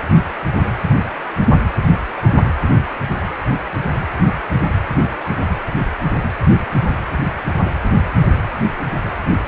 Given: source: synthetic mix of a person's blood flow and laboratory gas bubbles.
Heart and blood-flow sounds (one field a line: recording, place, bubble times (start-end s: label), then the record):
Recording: Doppler ultrasound of blood flow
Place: precordium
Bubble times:
no bubbles
From the record:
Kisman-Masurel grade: 000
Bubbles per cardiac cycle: 0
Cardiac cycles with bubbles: 0%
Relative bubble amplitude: no bubbles discernible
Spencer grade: 0 (complete lack of bubble signals)